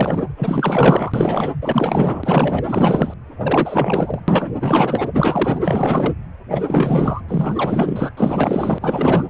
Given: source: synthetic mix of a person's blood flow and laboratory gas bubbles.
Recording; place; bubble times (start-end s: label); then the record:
Doppler ultrasound of blood flow; precordium
0.00-0.22 s: bubbles
0.36-1.50 s: bubbles
1.61-2.65 s: bubbles
2.67-3.14 s: bubbles
3.42-4.21 s: bubbles
4.28-4.50 s: bubbles
4.60-5.08 s: bubbles
5.13-5.60 s: bubbles
5.65-6.14 s: bubbles
6.50-7.21 s: bubbles
7.29-8.12 s: bubbles
8.17-9.25 s: bubbles
From the record:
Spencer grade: 4 (maximum detectable bubble signal sounding continuously throughout systole and diastole of every cardiac period, and overriding the amplitude of the normal cardiac signals); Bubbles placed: anywhere in the cardiac cycle